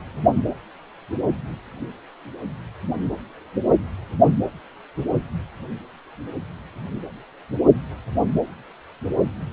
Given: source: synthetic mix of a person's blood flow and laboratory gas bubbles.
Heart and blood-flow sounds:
Doppler ultrasound of blood flow; precordium
no bubbles
From the record:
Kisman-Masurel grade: 000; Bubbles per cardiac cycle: 0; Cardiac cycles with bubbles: 0%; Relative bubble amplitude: no bubbles discernible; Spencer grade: 0 (complete lack of bubble signals)

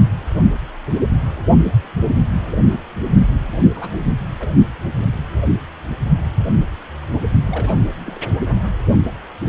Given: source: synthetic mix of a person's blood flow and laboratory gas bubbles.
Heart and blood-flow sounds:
Doppler ultrasound of blood flow; precordium
3.74-3.90 s: bubbles
3.95-4.05 s: bubbles
4.40-4.47 s: bubbles
7.44-7.74 s: bubbles
8.06-8.21 s: bubbles
From the record:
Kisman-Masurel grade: 221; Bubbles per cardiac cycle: several, 3 to 8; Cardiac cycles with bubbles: 10 to 50%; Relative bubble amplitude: barely perceptible (0.100 to 0.250); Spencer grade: 2 (many but less than half of the cardiac periods contain bubble signals, singularly or in groups); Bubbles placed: only in the low amplitude regions of the cardiac cycle

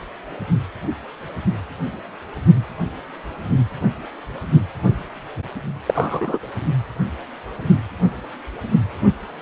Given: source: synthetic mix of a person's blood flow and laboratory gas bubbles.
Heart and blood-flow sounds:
Doppler ultrasound of blood flow; precordium
5.86-6.39 s: bubbles
From the record:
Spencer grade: 1 (occasional bubble signal discernible with the cardiac motion signal, with majority of cardiac periods free of bubbles); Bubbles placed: only in the low amplitude regions of the cardiac cycle

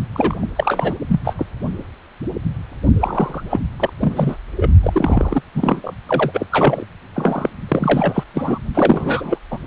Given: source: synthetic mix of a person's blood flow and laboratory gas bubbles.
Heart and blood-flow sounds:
Doppler ultrasound of blood flow; precordium
0.14-0.45 s: bubbles
0.56-0.94 s: bubbles
1.08-1.20 s: bubbles
1.24-1.33 s: bubbles
1.38-1.47 s: bubbles
3.00-3.44 s: bubbles
3.50-3.60 s: bubbles
3.79-3.90 s: bubbles
4.00-4.37 s: bubbles
4.56-4.71 s: bubbles
4.83-5.42 s: bubbles
5.54-5.94 s: bubbles
6.08-6.46 s: bubbles
6.51-6.86 s: bubbles
7.13-7.50 s: bubbles
7.68-8.23 s: bubbles
8.34-8.59 s: bubbles
8.74-9.38 s: bubbles
9.51-9.58 s: bubbles
From the record:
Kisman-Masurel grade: 333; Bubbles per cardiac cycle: rolling drumbeat, 9 or more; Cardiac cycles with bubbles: 50 to 99%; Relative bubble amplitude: loud (0.450 to 0.775); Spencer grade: 3 (all of the cardiac periods contain showers or single bubble signals, but not dominating or overriding the cardiac motion signals); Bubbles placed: only in the low amplitude regions of the cardiac cycle

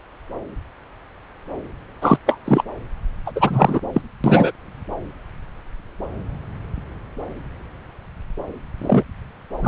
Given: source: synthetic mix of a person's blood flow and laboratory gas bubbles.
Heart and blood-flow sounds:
Doppler ultrasound of blood flow; subclavian vein
2.01-2.17 s: bubbles
2.26-2.38 s: bubbles
2.45-2.63 s: bubbles
3.25-3.32 s: bubbles
3.35-3.79 s: bubbles
3.92-4.01 s: bubbles
4.24-4.51 s: bubbles
8.82-9.04 s: bubbles
9.62-9.68 s: bubbles
From the record:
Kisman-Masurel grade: 223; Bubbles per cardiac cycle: several, 3 to 8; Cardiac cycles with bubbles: 10 to 50%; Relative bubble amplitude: loud (0.450 to 0.775); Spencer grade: 2 (many but less than half of the cardiac periods contain bubble signals, singularly or in groups); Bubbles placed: anywhere in the cardiac cycle

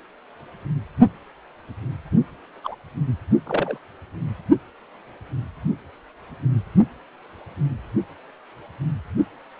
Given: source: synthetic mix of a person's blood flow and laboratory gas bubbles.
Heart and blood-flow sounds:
Doppler ultrasound of blood flow; precordium
2.64-2.75 s: bubbles
3.46-3.78 s: bubbles
From the record:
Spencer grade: 2 (many but less than half of the cardiac periods contain bubble signals, singularly or in groups); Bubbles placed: only in the low amplitude regions of the cardiac cycle

